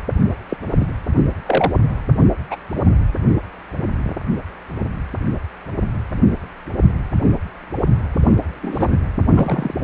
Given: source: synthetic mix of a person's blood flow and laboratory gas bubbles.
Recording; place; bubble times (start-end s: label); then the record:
Doppler ultrasound of blood flow; precordium
0.48-0.57 s: bubbles
0.80-0.86 s: bubbles
1.46-1.72 s: bubbles
2.50-2.56 s: bubbles
8.62-8.96 s: bubbles
9.32-9.74 s: bubbles
From the record:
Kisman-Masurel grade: 122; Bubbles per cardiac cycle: 1 to 2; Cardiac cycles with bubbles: 10 to 50%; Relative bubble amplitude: moderate (0.250 to 0.450); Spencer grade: 2 (many but less than half of the cardiac periods contain bubble signals, singularly or in groups); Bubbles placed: anywhere in the cardiac cycle